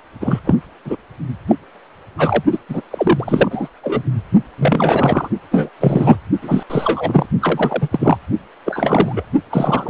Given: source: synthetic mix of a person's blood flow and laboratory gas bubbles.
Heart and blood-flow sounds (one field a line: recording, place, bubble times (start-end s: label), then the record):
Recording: Doppler ultrasound of blood flow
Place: precordium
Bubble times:
0.20-0.40 s: bubbles
0.46-0.55 s: bubbles
0.85-0.96 s: bubbles
1.47-1.55 s: bubbles
2.17-2.43 s: bubbles
2.51-2.58 s: bubbles
2.69-2.81 s: bubbles
2.90-3.69 s: bubbles
3.83-4.03 s: bubbles
4.58-5.29 s: bubbles
5.51-5.70 s: bubbles
5.80-6.17 s: bubbles
6.42-6.63 s: bubbles
6.70-7.26 s: bubbles
7.40-7.88 s: bubbles
7.91-8.18 s: bubbles
8.65-9.23 s: bubbles
9.50-9.90 s: bubbles
From the record:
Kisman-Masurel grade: 243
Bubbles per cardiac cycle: several, 3 to 8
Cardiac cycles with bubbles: 100%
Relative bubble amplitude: loud (0.450 to 0.775)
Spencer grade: 3 (all of the cardiac periods contain showers or single bubble signals, but not dominating or overriding the cardiac motion signals)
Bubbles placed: only in the low amplitude regions of the cardiac cycle